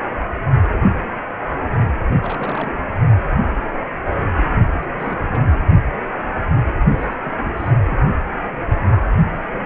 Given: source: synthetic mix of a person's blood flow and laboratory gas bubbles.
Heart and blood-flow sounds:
Doppler ultrasound of blood flow; precordium
2.12-2.70 s: bubbles
4.82-4.86 s: bubbles
4.95-5.44 s: bubbles
5.50-5.62 s: bubbles
6.97-7.15 s: bubbles
7.24-7.33 s: bubbles
7.44-7.53 s: bubbles
7.56-7.71 s: bubbles
7.87-7.97 s: bubbles
8.10-8.15 s: bubbles
From the record:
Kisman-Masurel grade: 221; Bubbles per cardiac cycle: several, 3 to 8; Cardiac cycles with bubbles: 10 to 50%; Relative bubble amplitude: barely perceptible (0.100 to 0.250); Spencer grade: 2 (many but less than half of the cardiac periods contain bubble signals, singularly or in groups); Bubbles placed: only in the low amplitude regions of the cardiac cycle

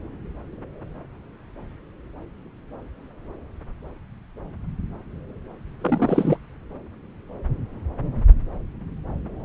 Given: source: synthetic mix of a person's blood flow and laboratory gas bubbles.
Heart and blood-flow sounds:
Doppler ultrasound of blood flow; subclavian vein
5.81-6.37 s: bubbles
From the record:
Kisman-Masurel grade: 212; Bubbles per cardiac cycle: several, 3 to 8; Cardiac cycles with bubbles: 1 to 10%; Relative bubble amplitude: moderate (0.250 to 0.450); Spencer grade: 1 (occasional bubble signal discernible with the cardiac motion signal, with majority of cardiac periods free of bubbles); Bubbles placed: anywhere in the cardiac cycle

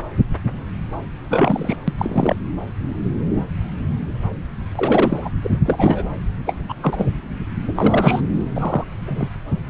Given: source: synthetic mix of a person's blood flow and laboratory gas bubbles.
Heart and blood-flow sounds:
Doppler ultrasound of blood flow; subclavian vein
1.28-1.76 s: bubbles
1.88-1.93 s: bubbles
1.97-2.36 s: bubbles
4.75-5.30 s: bubbles
5.43-5.59 s: bubbles
5.63-6.07 s: bubbles
6.45-6.56 s: bubbles
6.68-6.73 s: bubbles
6.82-7.05 s: bubbles
7.75-8.22 s: bubbles
8.55-8.84 s: bubbles
9.05-9.29 s: bubbles
From the record:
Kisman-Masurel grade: 223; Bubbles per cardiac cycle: several, 3 to 8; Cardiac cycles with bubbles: 10 to 50%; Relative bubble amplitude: loud (0.450 to 0.775); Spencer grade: 2 (many but less than half of the cardiac periods contain bubble signals, singularly or in groups); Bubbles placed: anywhere in the cardiac cycle

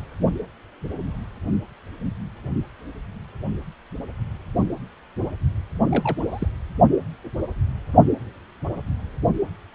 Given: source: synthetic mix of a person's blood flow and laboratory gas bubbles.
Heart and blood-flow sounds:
Doppler ultrasound of blood flow; precordium
5.85-6.22 s: bubbles
6.29-6.48 s: bubbles
From the record:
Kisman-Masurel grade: 211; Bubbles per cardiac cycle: several, 3 to 8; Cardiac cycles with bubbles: 1 to 10%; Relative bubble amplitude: barely perceptible (0.100 to 0.250); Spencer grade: 1 (occasional bubble signal discernible with the cardiac motion signal, with majority of cardiac periods free of bubbles); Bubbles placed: only in the low amplitude regions of the cardiac cycle

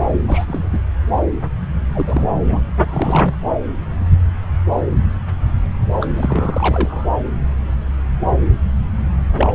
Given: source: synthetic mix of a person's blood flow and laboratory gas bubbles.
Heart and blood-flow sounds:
Doppler ultrasound of blood flow; subclavian vein
0.23-0.69 s: bubbles
0.72-0.80 s: bubbles
1.94-2.38 s: bubbles
2.47-2.62 s: bubbles
2.87-3.35 s: bubbles
6.00-6.07 s: bubbles
6.16-7.07 s: bubbles
9.37-9.55 s: bubbles
From the record:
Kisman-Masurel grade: 222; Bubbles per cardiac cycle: several, 3 to 8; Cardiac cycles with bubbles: 10 to 50%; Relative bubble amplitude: moderate (0.250 to 0.450); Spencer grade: 2 (many but less than half of the cardiac periods contain bubble signals, singularly or in groups); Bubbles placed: anywhere in the cardiac cycle

